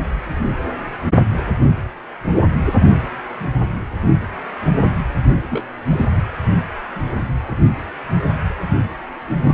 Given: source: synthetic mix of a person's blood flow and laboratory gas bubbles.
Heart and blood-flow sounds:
Doppler ultrasound of blood flow; precordium
5.50-5.64 s: bubbles
5.90-6.08 s: bubbles
6.16-6.22 s: bubbles
8.69-8.76 s: bubbles
9.43-9.54 s: bubbles
From the record:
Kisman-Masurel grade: 222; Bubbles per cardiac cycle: several, 3 to 8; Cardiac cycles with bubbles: 10 to 50%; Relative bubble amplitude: moderate (0.250 to 0.450); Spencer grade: 2 (many but less than half of the cardiac periods contain bubble signals, singularly or in groups); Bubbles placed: anywhere in the cardiac cycle

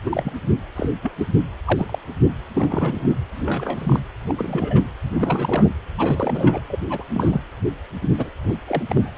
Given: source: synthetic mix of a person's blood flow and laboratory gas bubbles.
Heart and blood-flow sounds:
Doppler ultrasound of blood flow; precordium
0.05-0.32 s: bubbles
0.76-0.89 s: bubbles
1.03-1.11 s: bubbles
1.19-1.27 s: bubbles
1.64-1.98 s: bubbles
2.53-3.17 s: bubbles
3.35-4.00 s: bubbles
4.28-4.84 s: bubbles
5.03-5.69 s: bubbles
5.98-6.60 s: bubbles
6.70-6.79 s: bubbles
6.89-7.04 s: bubbles
7.13-7.41 s: bubbles
8.02-8.10 s: bubbles
8.17-8.30 s: bubbles
8.44-8.56 s: bubbles
8.66-8.82 s: bubbles
8.89-9.15 s: bubbles
From the record:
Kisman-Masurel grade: 242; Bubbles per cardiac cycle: several, 3 to 8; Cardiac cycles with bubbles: 100%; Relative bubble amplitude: moderate (0.250 to 0.450); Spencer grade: 3 (all of the cardiac periods contain showers or single bubble signals, but not dominating or overriding the cardiac motion signals); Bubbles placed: anywhere in the cardiac cycle

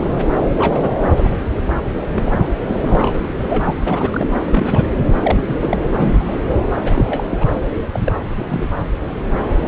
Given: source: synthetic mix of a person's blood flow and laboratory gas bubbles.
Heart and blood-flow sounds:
Doppler ultrasound of blood flow; subclavian vein
0.00-0.20 s: bubbles
0.58-0.95 s: bubbles
1.04-1.09 s: bubbles
1.16-1.29 s: bubbles
1.56-1.62 s: bubbles
2.10-2.48 s: bubbles
2.67-3.27 s: bubbles
3.39-3.76 s: bubbles
3.86-4.33 s: bubbles
4.50-4.91 s: bubbles
5.21-5.77 s: bubbles
5.94-6.40 s: bubbles
6.84-7.46 s: bubbles
7.93-8.00 s: bubbles
8.06-8.12 s: bubbles
8.39-8.68 s: bubbles
From the record:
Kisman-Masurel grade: 242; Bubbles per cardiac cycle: several, 3 to 8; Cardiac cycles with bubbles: 100%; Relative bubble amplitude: moderate (0.250 to 0.450); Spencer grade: 3 (all of the cardiac periods contain showers or single bubble signals, but not dominating or overriding the cardiac motion signals); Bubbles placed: anywhere in the cardiac cycle

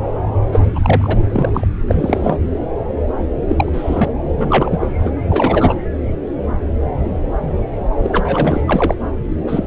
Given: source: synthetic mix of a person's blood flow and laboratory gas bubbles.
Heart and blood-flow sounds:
Doppler ultrasound of blood flow; subclavian vein
0.52-0.61 s: bubbles
0.75-1.18 s: bubbles
1.30-1.68 s: bubbles
1.88-2.37 s: bubbles
3.48-3.69 s: bubbles
3.73-4.08 s: bubbles
4.33-4.88 s: bubbles
4.98-5.13 s: bubbles
5.29-5.74 s: bubbles
8.02-8.62 s: bubbles
8.68-8.95 s: bubbles
9.47-9.63 s: bubbles
From the record:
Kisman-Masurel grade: 233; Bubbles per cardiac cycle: several, 3 to 8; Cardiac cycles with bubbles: 50 to 99%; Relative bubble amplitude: loud (0.450 to 0.775); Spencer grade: 3 (all of the cardiac periods contain showers or single bubble signals, but not dominating or overriding the cardiac motion signals); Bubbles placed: anywhere in the cardiac cycle

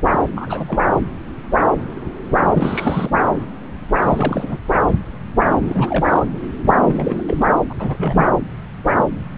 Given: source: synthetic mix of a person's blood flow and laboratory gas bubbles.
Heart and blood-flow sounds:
Doppler ultrasound of blood flow; subclavian vein
0.09-0.20 s: bubbles
0.35-0.78 s: bubbles
2.44-3.19 s: bubbles
3.97-4.58 s: bubbles
5.61-6.26 s: bubbles
6.62-6.72 s: bubbles
6.81-7.23 s: bubbles
7.28-7.45 s: bubbles
7.48-7.56 s: bubbles
7.69-7.75 s: bubbles
7.79-8.29 s: bubbles
From the record:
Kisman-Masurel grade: 332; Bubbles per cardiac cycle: rolling drumbeat, 9 or more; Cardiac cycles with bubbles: 50 to 99%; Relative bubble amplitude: moderate (0.250 to 0.450); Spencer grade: 3 (all of the cardiac periods contain showers or single bubble signals, but not dominating or overriding the cardiac motion signals); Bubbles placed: anywhere in the cardiac cycle

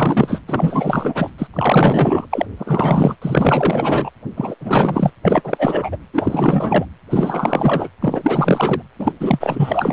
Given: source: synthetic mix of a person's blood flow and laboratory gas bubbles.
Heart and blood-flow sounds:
Doppler ultrasound of blood flow; precordium
0.00-0.41 s: bubbles
0.48-1.30 s: bubbles
1.38-1.47 s: bubbles
1.53-2.27 s: bubbles
2.31-2.46 s: bubbles
2.57-3.15 s: bubbles
3.21-4.10 s: bubbles
4.37-4.55 s: bubbles
4.61-5.11 s: bubbles
5.24-5.97 s: bubbles
6.13-6.85 s: bubbles
7.10-7.89 s: bubbles
8.00-8.82 s: bubbles
8.98-9.12 s: bubbles
9.20-9.93 s: bubbles
From the record:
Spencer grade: 4 (maximum detectable bubble signal sounding continuously throughout systole and diastole of every cardiac period, and overriding the amplitude of the normal cardiac signals); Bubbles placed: anywhere in the cardiac cycle

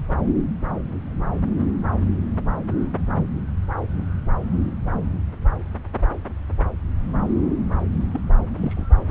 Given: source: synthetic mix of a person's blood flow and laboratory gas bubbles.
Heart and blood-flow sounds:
Doppler ultrasound of blood flow; subclavian vein
8.12-8.21 s: bubbles
8.57-8.85 s: bubbles
From the record:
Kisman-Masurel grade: 111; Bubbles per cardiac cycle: 1 to 2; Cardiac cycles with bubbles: 1 to 10%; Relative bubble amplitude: barely perceptible (0.100 to 0.250); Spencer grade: 1 (occasional bubble signal discernible with the cardiac motion signal, with majority of cardiac periods free of bubbles); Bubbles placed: anywhere in the cardiac cycle

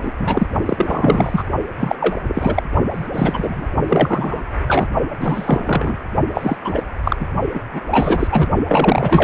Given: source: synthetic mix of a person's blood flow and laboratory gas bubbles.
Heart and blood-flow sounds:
Doppler ultrasound of blood flow; precordium
0.00-0.13 s: bubbles
0.20-0.47 s: bubbles
0.66-1.44 s: bubbles
1.79-1.95 s: bubbles
2.00-2.15 s: bubbles
2.28-2.63 s: bubbles
2.93-3.08 s: bubbles
3.13-3.66 s: bubbles
3.88-4.42 s: bubbles
4.68-4.88 s: bubbles
5.20-6.04 s: bubbles
6.34-6.57 s: bubbles
6.64-6.83 s: bubbles
7.04-7.17 s: bubbles
7.20-7.27 s: bubbles
7.54-7.61 s: bubbles
7.72-7.80 s: bubbles
7.91-8.28 s: bubbles
8.31-8.48 s: bubbles
8.68-9.24 s: bubbles
From the record:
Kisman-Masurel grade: 343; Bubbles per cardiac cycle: rolling drumbeat, 9 or more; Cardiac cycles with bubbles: 100%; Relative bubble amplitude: loud (0.450 to 0.775); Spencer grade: 3 (all of the cardiac periods contain showers or single bubble signals, but not dominating or overriding the cardiac motion signals); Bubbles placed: only in the low amplitude regions of the cardiac cycle

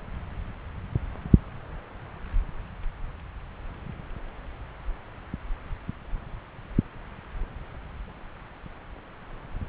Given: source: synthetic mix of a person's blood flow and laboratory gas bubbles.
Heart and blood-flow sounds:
Doppler ultrasound of blood flow; subclavian vein
no bubbles
From the record:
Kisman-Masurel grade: 000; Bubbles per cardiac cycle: 0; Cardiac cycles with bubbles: 0%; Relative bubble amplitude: no bubbles discernible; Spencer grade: 0 (complete lack of bubble signals)

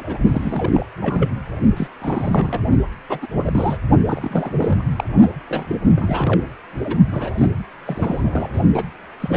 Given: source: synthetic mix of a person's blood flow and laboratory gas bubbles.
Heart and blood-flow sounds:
Doppler ultrasound of blood flow; precordium
0.00-0.18 s: bubbles
0.25-0.86 s: bubbles
1.00-1.31 s: bubbles
1.77-1.88 s: bubbles
2.00-2.63 s: bubbles
3.08-3.27 s: bubbles
3.45-3.76 s: bubbles
4.05-4.54 s: bubbles
4.57-4.84 s: bubbles
4.96-5.04 s: bubbles
5.50-5.78 s: bubbles
5.95-6.41 s: bubbles
6.84-6.97 s: bubbles
7.11-7.32 s: bubbles
7.38-7.46 s: bubbles
7.87-8.62 s: bubbles
8.74-8.89 s: bubbles
9.20-9.37 s: bubbles
From the record:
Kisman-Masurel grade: 342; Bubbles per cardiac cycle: rolling drumbeat, 9 or more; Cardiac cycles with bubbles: 100%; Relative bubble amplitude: moderate (0.250 to 0.450); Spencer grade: 3 (all of the cardiac periods contain showers or single bubble signals, but not dominating or overriding the cardiac motion signals); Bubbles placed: only in the low amplitude regions of the cardiac cycle

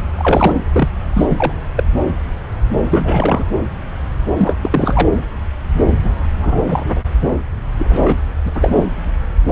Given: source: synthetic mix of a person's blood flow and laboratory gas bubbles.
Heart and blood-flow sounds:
Doppler ultrasound of blood flow; subclavian vein
0.18-0.59 s: bubbles
0.72-0.89 s: bubbles
1.15-1.53 s: bubbles
1.76-1.83 s: bubbles
2.85-3.45 s: bubbles
4.37-4.55 s: bubbles
4.61-5.08 s: bubbles
6.03-6.23 s: bubbles
6.36-6.61 s: bubbles
6.70-7.01 s: bubbles
7.21-7.29 s: bubbles
7.77-8.15 s: bubbles
8.45-8.85 s: bubbles
From the record:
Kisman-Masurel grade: 233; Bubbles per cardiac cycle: several, 3 to 8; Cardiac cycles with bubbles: 50 to 99%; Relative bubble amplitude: loud (0.450 to 0.775); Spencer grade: 3 (all of the cardiac periods contain showers or single bubble signals, but not dominating or overriding the cardiac motion signals); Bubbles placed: anywhere in the cardiac cycle

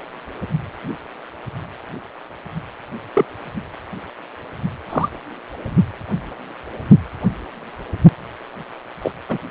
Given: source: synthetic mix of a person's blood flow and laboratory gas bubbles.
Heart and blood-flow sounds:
Doppler ultrasound of blood flow; precordium
3.14-3.25 s: bubbles
4.90-5.09 s: bubbles
9.01-9.11 s: bubbles
9.29-9.38 s: bubbles
From the record:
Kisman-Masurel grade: 122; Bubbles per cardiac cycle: 1 to 2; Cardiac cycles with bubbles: 10 to 50%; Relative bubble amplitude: moderate (0.250 to 0.450); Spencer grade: 2 (many but less than half of the cardiac periods contain bubble signals, singularly or in groups); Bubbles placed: anywhere in the cardiac cycle

